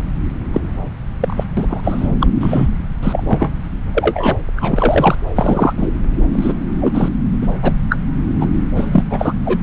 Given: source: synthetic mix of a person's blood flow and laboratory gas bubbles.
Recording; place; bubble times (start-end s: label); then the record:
Doppler ultrasound of blood flow; subclavian vein
0.00-0.03 s: bubbles
0.53-0.60 s: bubbles
1.20-1.44 s: bubbles
1.57-1.80 s: bubbles
1.83-2.08 s: bubbles
2.20-2.27 s: bubbles
2.40-2.68 s: bubbles
3.03-3.23 s: bubbles
3.27-3.51 s: bubbles
3.94-4.37 s: bubbles
4.57-5.16 s: bubbles
5.36-5.74 s: bubbles
5.77-5.92 s: bubbles
6.33-6.53 s: bubbles
6.81-7.10 s: bubbles
7.42-7.47 s: bubbles
7.62-7.73 s: bubbles
7.89-7.96 s: bubbles
8.40-8.46 s: bubbles
8.76-9.04 s: bubbles
9.10-9.33 s: bubbles
9.45-9.59 s: bubbles
From the record:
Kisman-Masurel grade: 243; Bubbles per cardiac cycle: several, 3 to 8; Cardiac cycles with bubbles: 100%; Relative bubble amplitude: loud (0.450 to 0.775); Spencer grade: 3 (all of the cardiac periods contain showers or single bubble signals, but not dominating or overriding the cardiac motion signals); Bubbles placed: anywhere in the cardiac cycle